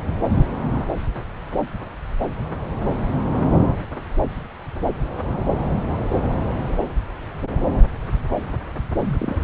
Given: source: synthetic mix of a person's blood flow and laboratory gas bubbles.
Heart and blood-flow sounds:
Doppler ultrasound of blood flow; subclavian vein
9.03-9.38 s: bubbles
From the record:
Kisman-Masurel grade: 211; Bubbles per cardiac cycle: several, 3 to 8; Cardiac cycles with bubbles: 1 to 10%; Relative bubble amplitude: barely perceptible (0.100 to 0.250); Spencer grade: 1 (occasional bubble signal discernible with the cardiac motion signal, with majority of cardiac periods free of bubbles); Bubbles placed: anywhere in the cardiac cycle

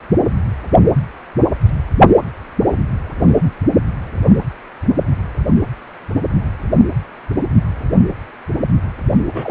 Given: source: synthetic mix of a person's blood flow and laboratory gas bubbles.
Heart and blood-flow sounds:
Doppler ultrasound of blood flow; precordium
9.33-9.51 s: bubbles
From the record:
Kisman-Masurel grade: 213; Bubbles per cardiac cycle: several, 3 to 8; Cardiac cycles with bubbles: 1 to 10%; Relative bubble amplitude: loud (0.450 to 0.775); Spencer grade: 1 (occasional bubble signal discernible with the cardiac motion signal, with majority of cardiac periods free of bubbles); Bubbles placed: anywhere in the cardiac cycle

